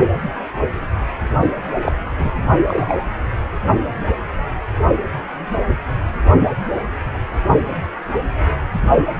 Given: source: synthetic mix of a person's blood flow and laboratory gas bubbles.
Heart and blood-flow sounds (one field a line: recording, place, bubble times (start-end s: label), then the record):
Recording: Doppler ultrasound of blood flow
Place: precordium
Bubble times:
1.81-1.92 s: bubbles
2.18-2.31 s: bubbles
2.68-2.94 s: bubbles
From the record:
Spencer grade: 2 (many but less than half of the cardiac periods contain bubble signals, singularly or in groups)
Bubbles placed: only in the low amplitude regions of the cardiac cycle